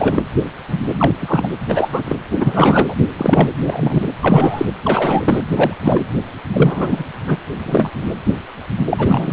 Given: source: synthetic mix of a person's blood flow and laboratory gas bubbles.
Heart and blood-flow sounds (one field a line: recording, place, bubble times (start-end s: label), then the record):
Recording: Doppler ultrasound of blood flow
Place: precordium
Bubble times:
0.00-0.23 s: bubbles
0.99-1.11 s: bubbles
1.19-1.48 s: bubbles
1.68-1.89 s: bubbles
1.92-2.16 s: bubbles
2.31-2.94 s: bubbles
3.18-3.49 s: bubbles
3.57-4.12 s: bubbles
4.21-4.66 s: bubbles
4.84-5.45 s: bubbles
5.56-5.74 s: bubbles
5.85-6.05 s: bubbles
6.53-7.04 s: bubbles
7.27-7.37 s: bubbles
7.58-7.90 s: bubbles
8.89-9.33 s: bubbles
From the record:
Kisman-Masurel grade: 233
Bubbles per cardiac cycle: several, 3 to 8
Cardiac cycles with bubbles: 50 to 99%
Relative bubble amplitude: loud (0.450 to 0.775)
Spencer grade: 3 (all of the cardiac periods contain showers or single bubble signals, but not dominating or overriding the cardiac motion signals)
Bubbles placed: anywhere in the cardiac cycle